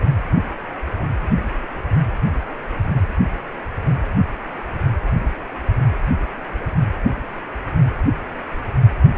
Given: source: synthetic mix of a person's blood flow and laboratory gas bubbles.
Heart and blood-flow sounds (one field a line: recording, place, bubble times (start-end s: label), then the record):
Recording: Doppler ultrasound of blood flow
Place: precordium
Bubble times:
no bubbles
From the record:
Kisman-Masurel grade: 000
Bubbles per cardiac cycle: 0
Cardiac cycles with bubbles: 0%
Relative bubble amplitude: no bubbles discernible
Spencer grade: 0 (complete lack of bubble signals)